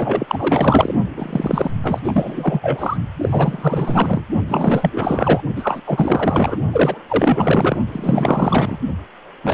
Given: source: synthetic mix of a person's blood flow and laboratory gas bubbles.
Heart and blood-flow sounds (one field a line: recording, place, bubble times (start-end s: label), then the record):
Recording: Doppler ultrasound of blood flow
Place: precordium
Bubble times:
0.00-0.95 s: bubbles
1.17-1.71 s: bubbles
1.83-2.00 s: bubbles
2.04-2.97 s: bubbles
3.21-4.26 s: bubbles
4.47-5.41 s: bubbles
5.55-5.82 s: bubbles
5.86-6.57 s: bubbles
6.71-7.03 s: bubbles
7.08-7.78 s: bubbles
7.91-8.79 s: bubbles
9.44-9.54 s: bubbles
From the record:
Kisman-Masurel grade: 444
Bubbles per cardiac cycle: continuous sound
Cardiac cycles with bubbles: 100%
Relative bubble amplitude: maximal (0.775 to 0.999)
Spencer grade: 4 (maximum detectable bubble signal sounding continuously throughout systole and diastole of every cardiac period, and overriding the amplitude of the normal cardiac signals)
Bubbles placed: only in the low amplitude regions of the cardiac cycle